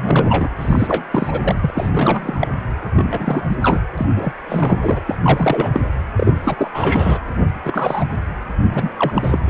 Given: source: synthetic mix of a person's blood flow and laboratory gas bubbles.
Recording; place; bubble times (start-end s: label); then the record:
Doppler ultrasound of blood flow; precordium
0.00-0.49 s: bubbles
0.58-1.05 s: bubbles
1.11-1.71 s: bubbles
1.74-1.90 s: bubbles
1.94-2.48 s: bubbles
2.96-3.56 s: bubbles
3.62-3.80 s: bubbles
3.97-4.06 s: bubbles
4.16-4.33 s: bubbles
4.49-5.01 s: bubbles
5.06-5.16 s: bubbles
5.22-5.71 s: bubbles
5.74-5.80 s: bubbles
6.16-6.33 s: bubbles
6.43-6.71 s: bubbles
6.74-7.20 s: bubbles
7.64-8.07 s: bubbles
8.71-8.91 s: bubbles
8.97-9.39 s: bubbles
9.46-9.50 s: bubbles
From the record:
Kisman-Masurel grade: 343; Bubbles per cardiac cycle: rolling drumbeat, 9 or more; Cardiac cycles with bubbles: 100%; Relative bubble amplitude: loud (0.450 to 0.775); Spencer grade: 3 (all of the cardiac periods contain showers or single bubble signals, but not dominating or overriding the cardiac motion signals); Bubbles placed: anywhere in the cardiac cycle